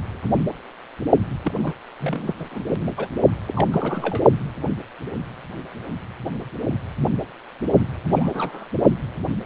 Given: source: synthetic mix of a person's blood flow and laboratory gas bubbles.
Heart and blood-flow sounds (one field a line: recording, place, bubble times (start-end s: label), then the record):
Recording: Doppler ultrasound of blood flow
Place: precordium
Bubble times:
1.42-1.54 s: bubbles
1.59-1.73 s: bubbles
2.00-2.34 s: bubbles
2.38-2.60 s: bubbles
2.96-3.07 s: bubbles
3.46-3.67 s: bubbles
3.71-4.21 s: bubbles
8.09-8.65 s: bubbles
From the record:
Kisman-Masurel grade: 221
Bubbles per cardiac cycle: several, 3 to 8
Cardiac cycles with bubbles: 10 to 50%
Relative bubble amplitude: barely perceptible (0.100 to 0.250)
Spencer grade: 2 (many but less than half of the cardiac periods contain bubble signals, singularly or in groups)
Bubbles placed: only in the low amplitude regions of the cardiac cycle